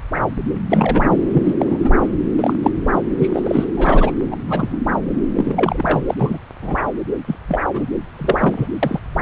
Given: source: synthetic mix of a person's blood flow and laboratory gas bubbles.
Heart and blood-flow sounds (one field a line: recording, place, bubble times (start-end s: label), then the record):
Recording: Doppler ultrasound of blood flow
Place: subclavian vein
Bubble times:
0.69-1.18 s: bubbles
1.33-1.54 s: bubbles
1.59-1.78 s: bubbles
1.82-1.89 s: bubbles
1.99-2.08 s: bubbles
2.38-2.54 s: bubbles
2.62-2.72 s: bubbles
2.92-3.02 s: bubbles
3.19-3.29 s: bubbles
3.34-3.64 s: bubbles
3.77-4.11 s: bubbles
4.31-4.37 s: bubbles
4.47-4.80 s: bubbles
5.34-6.01 s: bubbles
6.09-6.14 s: bubbles
6.17-6.38 s: bubbles
6.61-6.88 s: bubbles
7.27-7.35 s: bubbles
7.48-7.59 s: bubbles
7.74-7.90 s: bubbles
8.19-8.68 s: bubbles
8.83-9.00 s: bubbles
From the record:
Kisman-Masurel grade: 243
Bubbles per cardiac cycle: several, 3 to 8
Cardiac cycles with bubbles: 100%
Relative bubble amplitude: loud (0.450 to 0.775)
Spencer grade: 3 (all of the cardiac periods contain showers or single bubble signals, but not dominating or overriding the cardiac motion signals)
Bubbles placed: anywhere in the cardiac cycle